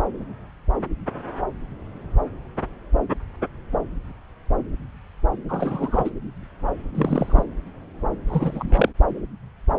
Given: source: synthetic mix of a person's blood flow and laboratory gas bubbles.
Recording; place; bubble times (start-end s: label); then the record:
Doppler ultrasound of blood flow; subclavian vein
5.49-6.10 s: bubbles
6.95-7.44 s: bubbles
8.27-8.88 s: bubbles
From the record:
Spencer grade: 2 (many but less than half of the cardiac periods contain bubble signals, singularly or in groups); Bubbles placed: anywhere in the cardiac cycle